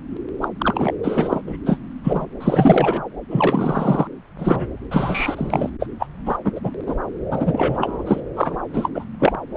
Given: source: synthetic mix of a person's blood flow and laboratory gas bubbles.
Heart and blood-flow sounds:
Doppler ultrasound of blood flow; subclavian vein
0.40-0.48 s: bubbles
0.58-0.93 s: bubbles
1.02-1.42 s: bubbles
1.46-1.56 s: bubbles
1.66-1.78 s: bubbles
2.04-2.27 s: bubbles
2.40-3.03 s: bubbles
3.29-4.08 s: bubbles
4.38-4.67 s: bubbles
4.91-5.70 s: bubbles
5.79-5.87 s: bubbles
5.99-6.07 s: bubbles
6.25-6.37 s: bubbles
6.45-6.51 s: bubbles
6.55-6.60 s: bubbles
6.63-6.71 s: bubbles
6.87-6.96 s: bubbles
7.30-8.03 s: bubbles
8.05-8.20 s: bubbles
8.36-8.59 s: bubbles
8.73-8.90 s: bubbles
8.95-9.05 s: bubbles
9.19-9.32 s: bubbles
9.55-9.57 s: bubbles
From the record:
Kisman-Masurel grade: 243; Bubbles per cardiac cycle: several, 3 to 8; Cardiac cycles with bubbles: 100%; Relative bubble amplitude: loud (0.450 to 0.775); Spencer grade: 3 (all of the cardiac periods contain showers or single bubble signals, but not dominating or overriding the cardiac motion signals); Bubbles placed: anywhere in the cardiac cycle

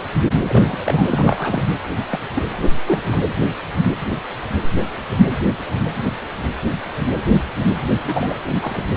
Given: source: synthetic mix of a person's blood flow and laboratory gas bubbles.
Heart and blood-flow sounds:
Doppler ultrasound of blood flow; precordium
0.42-1.06 s: bubbles
1.10-1.64 s: bubbles
2.12-2.20 s: bubbles
2.34-2.43 s: bubbles
2.87-3.20 s: bubbles
8.05-8.39 s: bubbles
8.61-8.84 s: bubbles
From the record:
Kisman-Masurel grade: 222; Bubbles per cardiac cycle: several, 3 to 8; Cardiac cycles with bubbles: 10 to 50%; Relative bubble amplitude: moderate (0.250 to 0.450); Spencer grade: 2 (many but less than half of the cardiac periods contain bubble signals, singularly or in groups); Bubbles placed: anywhere in the cardiac cycle

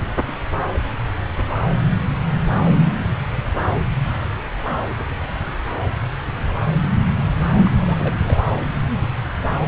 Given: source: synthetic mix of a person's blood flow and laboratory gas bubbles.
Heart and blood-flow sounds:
Doppler ultrasound of blood flow; subclavian vein
7.65-8.38 s: bubbles
From the record:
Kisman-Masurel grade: 211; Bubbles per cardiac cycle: several, 3 to 8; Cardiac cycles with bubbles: 1 to 10%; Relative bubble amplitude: barely perceptible (0.100 to 0.250); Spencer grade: 1 (occasional bubble signal discernible with the cardiac motion signal, with majority of cardiac periods free of bubbles); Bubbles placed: anywhere in the cardiac cycle

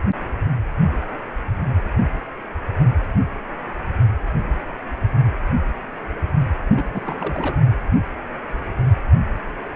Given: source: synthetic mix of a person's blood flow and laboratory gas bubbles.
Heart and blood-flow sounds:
Doppler ultrasound of blood flow; precordium
6.74-7.56 s: bubbles
From the record:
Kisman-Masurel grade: 221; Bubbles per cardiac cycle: several, 3 to 8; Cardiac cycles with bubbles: 10 to 50%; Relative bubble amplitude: barely perceptible (0.100 to 0.250); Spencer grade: 2 (many but less than half of the cardiac periods contain bubble signals, singularly or in groups); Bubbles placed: only in the low amplitude regions of the cardiac cycle

